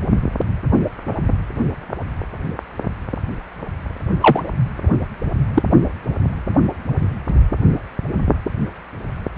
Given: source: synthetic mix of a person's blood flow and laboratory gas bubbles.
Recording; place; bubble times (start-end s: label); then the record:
Doppler ultrasound of blood flow; precordium
4.21-4.43 s: bubbles
5.54-5.62 s: bubbles
From the record:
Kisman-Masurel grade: 113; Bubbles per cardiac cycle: 1 to 2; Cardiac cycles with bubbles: 1 to 10%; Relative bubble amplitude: loud (0.450 to 0.775); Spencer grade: 1 (occasional bubble signal discernible with the cardiac motion signal, with majority of cardiac periods free of bubbles); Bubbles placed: only in the low amplitude regions of the cardiac cycle